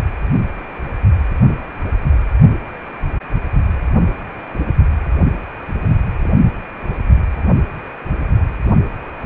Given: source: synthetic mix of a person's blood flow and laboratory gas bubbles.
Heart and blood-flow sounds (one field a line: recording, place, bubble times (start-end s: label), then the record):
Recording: Doppler ultrasound of blood flow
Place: precordium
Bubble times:
6.23-6.28 s: bubbles
6.41-6.51 s: bubbles
From the record:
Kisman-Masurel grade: 111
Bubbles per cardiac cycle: 1 to 2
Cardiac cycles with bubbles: 1 to 10%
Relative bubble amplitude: barely perceptible (0.100 to 0.250)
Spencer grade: 1 (occasional bubble signal discernible with the cardiac motion signal, with majority of cardiac periods free of bubbles)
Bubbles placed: only in the low amplitude regions of the cardiac cycle